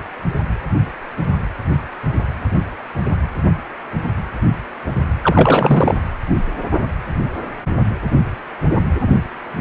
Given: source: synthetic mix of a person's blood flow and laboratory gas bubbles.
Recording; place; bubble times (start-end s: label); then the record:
Doppler ultrasound of blood flow; precordium
5.21-5.95 s: bubbles
From the record:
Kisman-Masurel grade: 213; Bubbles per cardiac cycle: several, 3 to 8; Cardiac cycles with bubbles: 1 to 10%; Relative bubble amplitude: loud (0.450 to 0.775); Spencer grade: 1 (occasional bubble signal discernible with the cardiac motion signal, with majority of cardiac periods free of bubbles); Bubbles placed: anywhere in the cardiac cycle